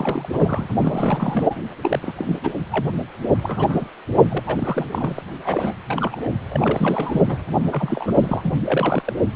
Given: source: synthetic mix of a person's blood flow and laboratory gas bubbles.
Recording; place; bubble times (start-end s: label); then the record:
Doppler ultrasound of blood flow; precordium
0.00-0.28 s: bubbles
0.32-0.70 s: bubbles
0.81-1.56 s: bubbles
1.82-1.99 s: bubbles
2.02-2.40 s: bubbles
2.43-2.52 s: bubbles
2.71-2.88 s: bubbles
3.41-3.85 s: bubbles
4.13-4.40 s: bubbles
4.46-4.86 s: bubbles
4.91-5.21 s: bubbles
5.45-5.74 s: bubbles
5.88-6.30 s: bubbles
6.50-7.22 s: bubbles
7.28-7.44 s: bubbles
7.49-7.68 s: bubbles
7.72-8.16 s: bubbles
8.20-9.13 s: bubbles
From the record:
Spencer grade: 3 (all of the cardiac periods contain showers or single bubble signals, but not dominating or overriding the cardiac motion signals); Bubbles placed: anywhere in the cardiac cycle